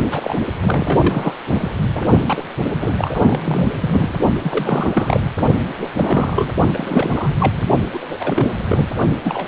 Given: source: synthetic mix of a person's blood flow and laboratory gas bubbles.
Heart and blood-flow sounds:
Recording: Doppler ultrasound of blood flow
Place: precordium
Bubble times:
0.11-0.34 s: bubbles
0.61-1.34 s: bubbles
1.54-1.70 s: bubbles
1.95-2.05 s: bubbles
2.26-2.43 s: bubbles
2.80-3.68 s: bubbles
3.81-4.15 s: bubbles
4.43-5.20 s: bubbles
5.24-5.30 s: bubbles
5.79-5.90 s: bubbles
5.95-6.53 s: bubbles
6.73-7.36 s: bubbles
7.40-7.65 s: bubbles
7.93-8.17 s: bubbles
8.19-8.51 s: bubbles
8.68-8.87 s: bubbles
9.24-9.48 s: bubbles
From the record:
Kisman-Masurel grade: 332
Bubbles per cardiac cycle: rolling drumbeat, 9 or more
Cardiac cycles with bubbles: 50 to 99%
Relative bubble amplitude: moderate (0.250 to 0.450)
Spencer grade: 3 (all of the cardiac periods contain showers or single bubble signals, but not dominating or overriding the cardiac motion signals)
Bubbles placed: only in the low amplitude regions of the cardiac cycle

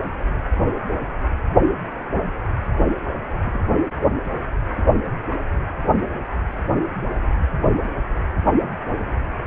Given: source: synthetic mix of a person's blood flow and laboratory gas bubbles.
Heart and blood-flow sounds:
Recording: Doppler ultrasound of blood flow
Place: precordium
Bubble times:
3.46-3.59 s: bubbles
From the record:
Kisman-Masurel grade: 121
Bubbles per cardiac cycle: 1 to 2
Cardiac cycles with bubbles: 10 to 50%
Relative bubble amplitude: barely perceptible (0.100 to 0.250)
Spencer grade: 2 (many but less than half of the cardiac periods contain bubble signals, singularly or in groups)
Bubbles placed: only in the low amplitude regions of the cardiac cycle

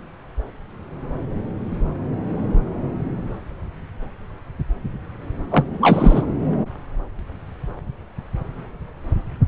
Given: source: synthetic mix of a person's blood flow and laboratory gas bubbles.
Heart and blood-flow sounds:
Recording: Doppler ultrasound of blood flow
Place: subclavian vein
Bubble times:
5.50-5.64 s: bubbles
5.81-6.25 s: bubbles
From the record:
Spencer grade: 1 (occasional bubble signal discernible with the cardiac motion signal, with majority of cardiac periods free of bubbles)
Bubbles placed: anywhere in the cardiac cycle

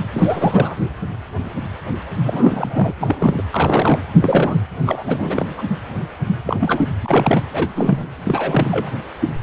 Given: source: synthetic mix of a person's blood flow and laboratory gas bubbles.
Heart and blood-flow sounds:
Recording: Doppler ultrasound of blood flow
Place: precordium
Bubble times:
0.12-0.74 s: bubbles
2.25-2.94 s: bubbles
3.01-3.42 s: bubbles
3.51-4.03 s: bubbles
4.21-4.59 s: bubbles
4.85-5.04 s: bubbles
5.07-5.55 s: bubbles
5.57-5.63 s: bubbles
6.46-6.89 s: bubbles
7.02-7.44 s: bubbles
7.53-8.05 s: bubbles
8.23-8.89 s: bubbles
From the record:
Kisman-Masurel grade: 332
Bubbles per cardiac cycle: rolling drumbeat, 9 or more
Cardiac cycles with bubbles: 50 to 99%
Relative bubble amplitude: moderate (0.250 to 0.450)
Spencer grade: 3 (all of the cardiac periods contain showers or single bubble signals, but not dominating or overriding the cardiac motion signals)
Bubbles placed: anywhere in the cardiac cycle

